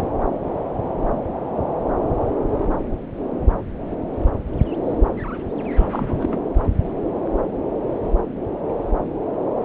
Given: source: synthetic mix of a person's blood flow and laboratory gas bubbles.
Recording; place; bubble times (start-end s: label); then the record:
Doppler ultrasound of blood flow; subclavian vein
5.78-6.38 s: bubbles
From the record:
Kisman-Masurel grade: 212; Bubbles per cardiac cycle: several, 3 to 8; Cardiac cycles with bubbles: 1 to 10%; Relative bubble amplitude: moderate (0.250 to 0.450); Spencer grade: 1 (occasional bubble signal discernible with the cardiac motion signal, with majority of cardiac periods free of bubbles); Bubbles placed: anywhere in the cardiac cycle